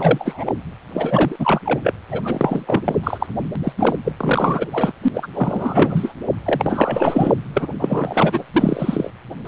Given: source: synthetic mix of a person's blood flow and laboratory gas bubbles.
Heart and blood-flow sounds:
Doppler ultrasound of blood flow; precordium
0.00-0.53 s: bubbles
0.93-1.36 s: bubbles
1.39-1.60 s: bubbles
1.65-1.81 s: bubbles
1.83-1.94 s: bubbles
2.10-2.81 s: bubbles
2.84-2.95 s: bubbles
3.03-3.26 s: bubbles
3.63-3.72 s: bubbles
3.77-3.96 s: bubbles
4.04-4.13 s: bubbles
4.17-4.67 s: bubbles
4.71-4.92 s: bubbles
5.02-5.08 s: bubbles
5.13-6.14 s: bubbles
6.45-7.35 s: bubbles
7.54-7.68 s: bubbles
7.79-8.44 s: bubbles
8.52-9.11 s: bubbles
9.45-9.48 s: bubbles
From the record:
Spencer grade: 4 (maximum detectable bubble signal sounding continuously throughout systole and diastole of every cardiac period, and overriding the amplitude of the normal cardiac signals); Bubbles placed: anywhere in the cardiac cycle

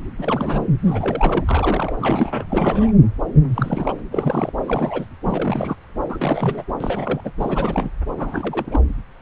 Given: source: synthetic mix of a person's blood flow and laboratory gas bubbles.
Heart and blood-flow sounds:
Doppler ultrasound of blood flow; subclavian vein
0.18-0.67 s: bubbles
0.85-1.44 s: bubbles
1.47-1.93 s: bubbles
1.99-2.45 s: bubbles
2.50-2.92 s: bubbles
3.48-3.93 s: bubbles
4.12-4.53 s: bubbles
4.66-5.06 s: bubbles
5.25-5.75 s: bubbles
6.08-6.64 s: bubbles
6.80-7.21 s: bubbles
7.24-7.32 s: bubbles
7.39-7.90 s: bubbles
8.16-8.80 s: bubbles
From the record:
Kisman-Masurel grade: 332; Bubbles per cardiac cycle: rolling drumbeat, 9 or more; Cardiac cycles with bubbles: 50 to 99%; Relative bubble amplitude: moderate (0.250 to 0.450); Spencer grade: 3 (all of the cardiac periods contain showers or single bubble signals, but not dominating or overriding the cardiac motion signals); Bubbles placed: anywhere in the cardiac cycle

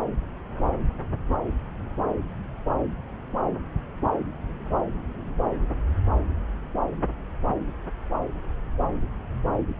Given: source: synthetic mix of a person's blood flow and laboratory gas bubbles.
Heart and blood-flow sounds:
Doppler ultrasound of blood flow; subclavian vein
no bubbles
From the record:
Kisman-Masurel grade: 000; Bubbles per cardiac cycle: 0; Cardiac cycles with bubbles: 0%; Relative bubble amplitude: no bubbles discernible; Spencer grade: 0 (complete lack of bubble signals)

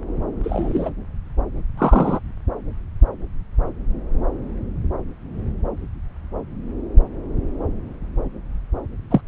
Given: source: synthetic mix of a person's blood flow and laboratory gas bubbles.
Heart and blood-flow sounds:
Doppler ultrasound of blood flow; subclavian vein
0.43-0.90 s: bubbles
1.77-2.19 s: bubbles
9.10-9.21 s: bubbles
From the record:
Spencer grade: 2 (many but less than half of the cardiac periods contain bubble signals, singularly or in groups); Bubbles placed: anywhere in the cardiac cycle

